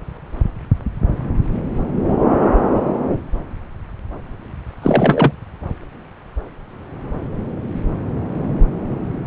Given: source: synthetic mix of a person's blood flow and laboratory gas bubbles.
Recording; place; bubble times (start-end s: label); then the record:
Doppler ultrasound of blood flow; subclavian vein
4.82-5.31 s: bubbles
From the record:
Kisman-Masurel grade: 213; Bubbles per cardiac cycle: several, 3 to 8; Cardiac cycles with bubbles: 1 to 10%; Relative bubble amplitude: loud (0.450 to 0.775); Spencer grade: 1 (occasional bubble signal discernible with the cardiac motion signal, with majority of cardiac periods free of bubbles); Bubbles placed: anywhere in the cardiac cycle